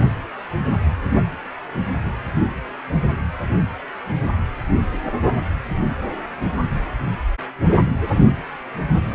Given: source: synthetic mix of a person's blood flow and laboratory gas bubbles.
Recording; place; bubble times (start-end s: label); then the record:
Doppler ultrasound of blood flow; precordium
no bubbles
From the record:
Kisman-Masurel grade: 000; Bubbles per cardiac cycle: 0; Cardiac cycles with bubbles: 0%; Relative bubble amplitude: no bubbles discernible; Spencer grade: 0 (complete lack of bubble signals)